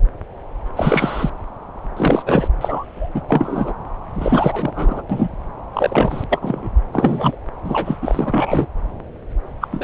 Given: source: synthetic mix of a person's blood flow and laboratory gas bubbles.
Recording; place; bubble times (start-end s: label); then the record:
Doppler ultrasound of blood flow; subclavian vein
0.76-1.29 s: bubbles
1.97-2.23 s: bubbles
2.26-2.48 s: bubbles
2.60-3.10 s: bubbles
3.14-3.21 s: bubbles
3.29-3.74 s: bubbles
4.14-5.02 s: bubbles
5.09-5.29 s: bubbles
5.73-6.24 s: bubbles
6.29-6.69 s: bubbles
6.92-7.36 s: bubbles
7.64-7.97 s: bubbles
8.02-8.67 s: bubbles
9.61-9.68 s: bubbles
9.71-9.84 s: bubbles
From the record:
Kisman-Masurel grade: 233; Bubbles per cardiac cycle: several, 3 to 8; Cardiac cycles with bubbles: 50 to 99%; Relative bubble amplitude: loud (0.450 to 0.775); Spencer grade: 3 (all of the cardiac periods contain showers or single bubble signals, but not dominating or overriding the cardiac motion signals); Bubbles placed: anywhere in the cardiac cycle